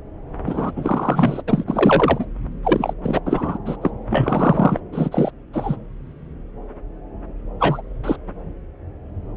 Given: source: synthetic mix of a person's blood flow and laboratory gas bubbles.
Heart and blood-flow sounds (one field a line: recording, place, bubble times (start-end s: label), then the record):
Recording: Doppler ultrasound of blood flow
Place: subclavian vein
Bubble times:
0.46-0.72 s: bubbles
0.76-1.42 s: bubbles
1.48-2.25 s: bubbles
2.63-2.94 s: bubbles
3.03-3.21 s: bubbles
3.25-3.58 s: bubbles
3.66-3.76 s: bubbles
3.81-3.91 s: bubbles
4.09-4.79 s: bubbles
4.92-5.31 s: bubbles
5.53-5.76 s: bubbles
7.60-7.81 s: bubbles
8.04-8.16 s: bubbles
From the record:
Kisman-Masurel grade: 233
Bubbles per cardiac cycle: several, 3 to 8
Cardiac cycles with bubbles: 50 to 99%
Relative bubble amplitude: loud (0.450 to 0.775)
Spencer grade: 3 (all of the cardiac periods contain showers or single bubble signals, but not dominating or overriding the cardiac motion signals)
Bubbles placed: anywhere in the cardiac cycle